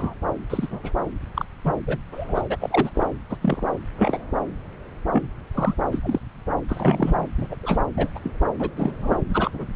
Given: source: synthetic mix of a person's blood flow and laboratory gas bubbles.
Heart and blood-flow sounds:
Doppler ultrasound of blood flow; subclavian vein
0.00-0.14 s: bubbles
0.49-0.67 s: bubbles
0.70-0.81 s: bubbles
0.83-0.91 s: bubbles
1.34-1.46 s: bubbles
1.65-1.72 s: bubbles
1.87-1.98 s: bubbles
2.12-2.43 s: bubbles
2.50-2.56 s: bubbles
2.60-2.90 s: bubbles
2.95-3.06 s: bubbles
3.30-3.36 s: bubbles
3.41-3.65 s: bubbles
3.97-4.20 s: bubbles
5.12-5.29 s: bubbles
5.54-5.75 s: bubbles
5.92-5.99 s: bubbles
6.03-6.19 s: bubbles
6.68-7.25 s: bubbles
7.38-7.47 s: bubbles
7.50-7.56 s: bubbles
7.62-7.78 s: bubbles
7.96-8.10 s: bubbles
8.14-8.19 s: bubbles
8.23-8.31 s: bubbles
8.59-8.71 s: bubbles
8.77-8.95 s: bubbles
9.00-9.21 s: bubbles
9.29-9.51 s: bubbles
9.54-9.66 s: bubbles
From the record:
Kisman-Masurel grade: 232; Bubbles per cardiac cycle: several, 3 to 8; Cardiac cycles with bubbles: 50 to 99%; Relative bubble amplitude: moderate (0.250 to 0.450); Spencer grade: 3 (all of the cardiac periods contain showers or single bubble signals, but not dominating or overriding the cardiac motion signals); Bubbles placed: anywhere in the cardiac cycle

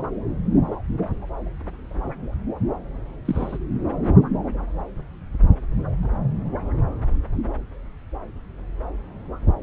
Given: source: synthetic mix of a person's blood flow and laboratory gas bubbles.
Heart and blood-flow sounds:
Doppler ultrasound of blood flow; subclavian vein
3.25-3.58 s: bubbles
From the record:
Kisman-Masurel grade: 211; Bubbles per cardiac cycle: several, 3 to 8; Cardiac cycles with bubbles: 1 to 10%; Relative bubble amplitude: barely perceptible (0.100 to 0.250); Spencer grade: 1 (occasional bubble signal discernible with the cardiac motion signal, with majority of cardiac periods free of bubbles); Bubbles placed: anywhere in the cardiac cycle

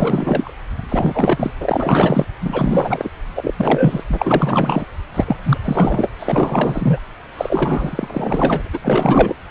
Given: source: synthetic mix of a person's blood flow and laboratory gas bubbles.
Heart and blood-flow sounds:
Doppler ultrasound of blood flow; subclavian vein
0.00-0.53 s: bubbles
0.78-0.80 s: bubbles
0.89-1.51 s: bubbles
1.60-2.25 s: bubbles
2.40-3.10 s: bubbles
3.35-3.54 s: bubbles
3.57-4.04 s: bubbles
4.09-4.86 s: bubbles
5.14-5.36 s: bubbles
5.44-5.58 s: bubbles
5.65-6.10 s: bubbles
6.19-7.00 s: bubbles
7.37-8.70 s: bubbles
8.73-8.79 s: bubbles
8.83-9.36 s: bubbles
From the record:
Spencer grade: 4 (maximum detectable bubble signal sounding continuously throughout systole and diastole of every cardiac period, and overriding the amplitude of the normal cardiac signals); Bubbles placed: anywhere in the cardiac cycle

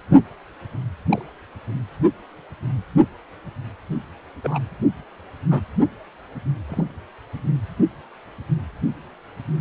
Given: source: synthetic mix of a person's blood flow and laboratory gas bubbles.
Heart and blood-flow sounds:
Doppler ultrasound of blood flow; precordium
1.09-1.22 s: bubbles
4.43-4.59 s: bubbles
5.50-5.61 s: bubbles
6.70-6.84 s: bubbles
From the record:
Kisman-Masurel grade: 122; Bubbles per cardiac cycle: 1 to 2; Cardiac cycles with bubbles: 10 to 50%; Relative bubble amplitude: moderate (0.250 to 0.450); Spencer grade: 2 (many but less than half of the cardiac periods contain bubble signals, singularly or in groups); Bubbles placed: anywhere in the cardiac cycle

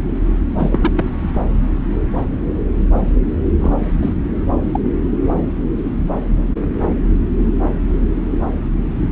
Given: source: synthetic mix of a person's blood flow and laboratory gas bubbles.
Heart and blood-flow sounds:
Doppler ultrasound of blood flow; subclavian vein
0.58-0.91 s: bubbles
0.95-1.29 s: bubbles
1.33-1.42 s: bubbles
3.60-3.73 s: bubbles
4.02-4.13 s: bubbles
4.68-4.79 s: bubbles
From the record:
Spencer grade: 2 (many but less than half of the cardiac periods contain bubble signals, singularly or in groups); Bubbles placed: anywhere in the cardiac cycle

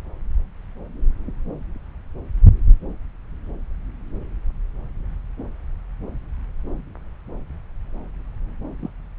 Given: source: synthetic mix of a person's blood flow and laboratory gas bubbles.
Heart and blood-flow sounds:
Doppler ultrasound of blood flow; subclavian vein
8.79-8.90 s: bubbles
From the record:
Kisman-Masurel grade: 111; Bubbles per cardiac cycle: 1 to 2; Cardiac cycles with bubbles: 1 to 10%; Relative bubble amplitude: barely perceptible (0.100 to 0.250); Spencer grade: 1 (occasional bubble signal discernible with the cardiac motion signal, with majority of cardiac periods free of bubbles); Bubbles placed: anywhere in the cardiac cycle

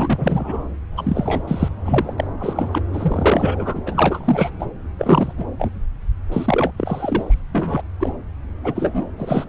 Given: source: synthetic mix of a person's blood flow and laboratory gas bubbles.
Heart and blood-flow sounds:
Doppler ultrasound of blood flow; subclavian vein
0.00-0.67 s: bubbles
0.96-1.43 s: bubbles
1.47-1.69 s: bubbles
1.84-2.14 s: bubbles
2.18-2.27 s: bubbles
2.39-2.82 s: bubbles
2.93-3.81 s: bubbles
3.86-4.50 s: bubbles
4.58-4.66 s: bubbles
4.98-5.33 s: bubbles
5.38-5.45 s: bubbles
5.59-5.71 s: bubbles
6.32-6.72 s: bubbles
6.77-7.41 s: bubbles
7.53-7.82 s: bubbles
8.00-8.12 s: bubbles
8.64-9.05 s: bubbles
9.19-9.45 s: bubbles
From the record:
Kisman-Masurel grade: 343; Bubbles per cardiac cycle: rolling drumbeat, 9 or more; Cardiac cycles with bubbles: 100%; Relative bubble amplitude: loud (0.450 to 0.775); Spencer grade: 3 (all of the cardiac periods contain showers or single bubble signals, but not dominating or overriding the cardiac motion signals); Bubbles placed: anywhere in the cardiac cycle

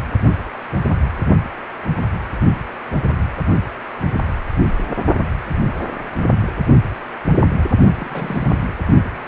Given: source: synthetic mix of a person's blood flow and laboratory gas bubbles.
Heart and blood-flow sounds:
Doppler ultrasound of blood flow; precordium
8.00-8.65 s: bubbles
From the record:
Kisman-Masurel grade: 221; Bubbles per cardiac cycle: several, 3 to 8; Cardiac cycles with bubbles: 10 to 50%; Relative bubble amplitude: barely perceptible (0.100 to 0.250); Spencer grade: 2 (many but less than half of the cardiac periods contain bubble signals, singularly or in groups); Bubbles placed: only in the low amplitude regions of the cardiac cycle

